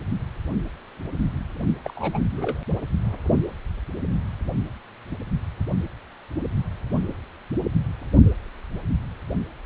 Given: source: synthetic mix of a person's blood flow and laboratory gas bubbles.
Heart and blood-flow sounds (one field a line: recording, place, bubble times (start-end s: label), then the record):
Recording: Doppler ultrasound of blood flow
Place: precordium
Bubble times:
1.84-2.21 s: bubbles
2.35-2.59 s: bubbles
From the record:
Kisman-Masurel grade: 211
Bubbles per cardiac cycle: several, 3 to 8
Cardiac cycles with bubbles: 1 to 10%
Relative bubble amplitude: barely perceptible (0.100 to 0.250)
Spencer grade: 1 (occasional bubble signal discernible with the cardiac motion signal, with majority of cardiac periods free of bubbles)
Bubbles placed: only in the low amplitude regions of the cardiac cycle